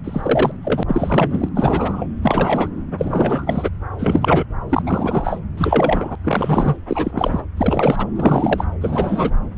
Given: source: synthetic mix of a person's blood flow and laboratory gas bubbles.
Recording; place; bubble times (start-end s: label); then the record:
Doppler ultrasound of blood flow; subclavian vein
0.04-0.52 s: bubbles
0.62-0.83 s: bubbles
0.88-1.49 s: bubbles
1.56-2.07 s: bubbles
2.23-2.69 s: bubbles
2.98-3.69 s: bubbles
3.98-4.45 s: bubbles
4.69-4.82 s: bubbles
4.86-5.40 s: bubbles
5.57-6.16 s: bubbles
6.24-6.77 s: bubbles
6.87-7.46 s: bubbles
7.56-8.07 s: bubbles
8.16-8.64 s: bubbles
8.81-9.30 s: bubbles
From the record:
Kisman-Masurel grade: 342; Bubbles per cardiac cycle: rolling drumbeat, 9 or more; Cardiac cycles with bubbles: 100%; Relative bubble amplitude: moderate (0.250 to 0.450); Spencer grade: 3 (all of the cardiac periods contain showers or single bubble signals, but not dominating or overriding the cardiac motion signals); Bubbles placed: anywhere in the cardiac cycle